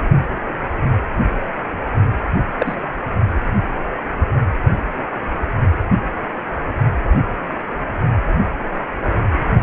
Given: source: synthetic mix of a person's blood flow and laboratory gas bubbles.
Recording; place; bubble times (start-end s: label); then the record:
Doppler ultrasound of blood flow; precordium
2.59-2.75 s: bubbles
From the record:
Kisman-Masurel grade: 112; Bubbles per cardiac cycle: 1 to 2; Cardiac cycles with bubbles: 1 to 10%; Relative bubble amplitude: moderate (0.250 to 0.450); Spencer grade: 1 (occasional bubble signal discernible with the cardiac motion signal, with majority of cardiac periods free of bubbles); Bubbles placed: only in the low amplitude regions of the cardiac cycle